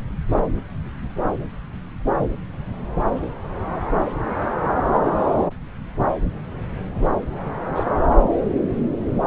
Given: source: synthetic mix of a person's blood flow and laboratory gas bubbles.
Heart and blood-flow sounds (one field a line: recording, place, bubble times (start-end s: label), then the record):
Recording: Doppler ultrasound of blood flow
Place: subclavian vein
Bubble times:
7.75-7.83 s: bubbles
From the record:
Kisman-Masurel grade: 112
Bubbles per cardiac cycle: 1 to 2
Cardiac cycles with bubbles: 1 to 10%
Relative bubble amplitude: moderate (0.250 to 0.450)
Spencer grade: 1 (occasional bubble signal discernible with the cardiac motion signal, with majority of cardiac periods free of bubbles)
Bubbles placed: anywhere in the cardiac cycle